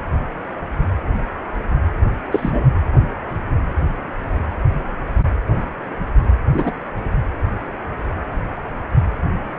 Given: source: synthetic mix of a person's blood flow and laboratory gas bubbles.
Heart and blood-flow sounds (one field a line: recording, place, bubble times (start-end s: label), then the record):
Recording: Doppler ultrasound of blood flow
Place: precordium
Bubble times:
2.31-2.65 s: bubbles
6.51-6.71 s: bubbles
From the record:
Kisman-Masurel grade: 123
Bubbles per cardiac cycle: 1 to 2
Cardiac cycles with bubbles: 10 to 50%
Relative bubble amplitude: loud (0.450 to 0.775)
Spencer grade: 2 (many but less than half of the cardiac periods contain bubble signals, singularly or in groups)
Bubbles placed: anywhere in the cardiac cycle